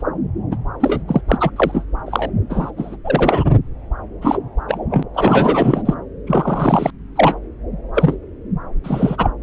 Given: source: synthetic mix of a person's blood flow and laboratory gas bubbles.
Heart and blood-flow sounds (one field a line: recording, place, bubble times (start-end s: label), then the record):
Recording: Doppler ultrasound of blood flow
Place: subclavian vein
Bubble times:
0.00-0.02 s: bubbles
0.51-0.56 s: bubbles
0.80-1.02 s: bubbles
1.07-1.21 s: bubbles
1.28-1.51 s: bubbles
1.56-1.85 s: bubbles
2.06-2.30 s: bubbles
2.50-2.71 s: bubbles
2.77-2.96 s: bubbles
3.04-3.44 s: bubbles
4.21-4.38 s: bubbles
4.68-4.80 s: bubbles
4.90-5.03 s: bubbles
5.14-5.83 s: bubbles
5.85-5.95 s: bubbles
6.27-6.91 s: bubbles
7.16-7.37 s: bubbles
7.94-8.16 s: bubbles
8.83-9.30 s: bubbles
From the record:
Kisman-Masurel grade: 343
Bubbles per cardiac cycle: rolling drumbeat, 9 or more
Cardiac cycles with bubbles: 100%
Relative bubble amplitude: loud (0.450 to 0.775)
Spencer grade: 3 (all of the cardiac periods contain showers or single bubble signals, but not dominating or overriding the cardiac motion signals)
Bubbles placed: anywhere in the cardiac cycle